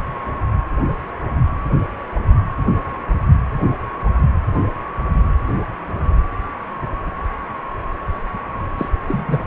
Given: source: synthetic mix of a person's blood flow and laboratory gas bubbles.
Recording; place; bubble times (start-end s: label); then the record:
Doppler ultrasound of blood flow; precordium
8.78-8.89 s: bubbles
9.07-9.47 s: bubbles
From the record:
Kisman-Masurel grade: 212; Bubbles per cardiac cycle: several, 3 to 8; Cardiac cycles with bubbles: 1 to 10%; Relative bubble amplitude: moderate (0.250 to 0.450); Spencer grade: 1 (occasional bubble signal discernible with the cardiac motion signal, with majority of cardiac periods free of bubbles); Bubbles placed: anywhere in the cardiac cycle